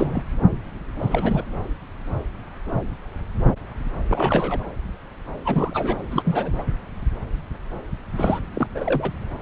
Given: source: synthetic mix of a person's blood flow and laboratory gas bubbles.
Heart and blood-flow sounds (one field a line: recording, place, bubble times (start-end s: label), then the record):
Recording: Doppler ultrasound of blood flow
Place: subclavian vein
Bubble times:
0.00-0.22 s: bubbles
1.00-1.44 s: bubbles
4.09-4.60 s: bubbles
5.45-6.01 s: bubbles
6.11-6.64 s: bubbles
8.16-8.40 s: bubbles
8.54-8.67 s: bubbles
8.74-9.11 s: bubbles
From the record:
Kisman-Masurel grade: 222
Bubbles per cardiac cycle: several, 3 to 8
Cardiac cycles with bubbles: 10 to 50%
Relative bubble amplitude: moderate (0.250 to 0.450)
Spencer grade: 2 (many but less than half of the cardiac periods contain bubble signals, singularly or in groups)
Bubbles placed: anywhere in the cardiac cycle